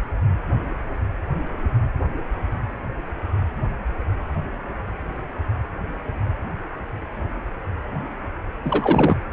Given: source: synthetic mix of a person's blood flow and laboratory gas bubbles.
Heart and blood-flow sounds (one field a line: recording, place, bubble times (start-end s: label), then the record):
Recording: Doppler ultrasound of blood flow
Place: precordium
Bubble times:
8.64-9.17 s: bubbles
From the record:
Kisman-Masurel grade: 212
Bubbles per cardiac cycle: several, 3 to 8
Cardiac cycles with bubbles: 1 to 10%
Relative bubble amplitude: moderate (0.250 to 0.450)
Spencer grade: 1 (occasional bubble signal discernible with the cardiac motion signal, with majority of cardiac periods free of bubbles)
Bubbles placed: anywhere in the cardiac cycle